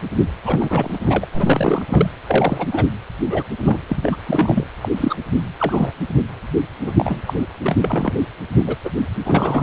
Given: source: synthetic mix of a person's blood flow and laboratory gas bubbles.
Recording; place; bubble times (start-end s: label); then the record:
Doppler ultrasound of blood flow; precordium
0.45-0.99 s: bubbles
1.02-1.26 s: bubbles
1.32-1.85 s: bubbles
1.89-2.12 s: bubbles
2.27-2.67 s: bubbles
2.71-2.85 s: bubbles
3.29-3.44 s: bubbles
3.58-3.80 s: bubbles
3.89-4.16 s: bubbles
4.26-4.67 s: bubbles
4.81-4.89 s: bubbles
4.97-5.15 s: bubbles
5.58-5.92 s: bubbles
6.84-6.92 s: bubbles
6.96-7.22 s: bubbles
7.25-7.33 s: bubbles
7.63-7.76 s: bubbles
7.81-8.12 s: bubbles
8.55-8.76 s: bubbles
8.84-8.90 s: bubbles
9.25-9.63 s: bubbles
From the record:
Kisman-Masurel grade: 242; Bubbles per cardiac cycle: several, 3 to 8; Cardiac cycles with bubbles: 100%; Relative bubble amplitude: moderate (0.250 to 0.450); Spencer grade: 3 (all of the cardiac periods contain showers or single bubble signals, but not dominating or overriding the cardiac motion signals); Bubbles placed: anywhere in the cardiac cycle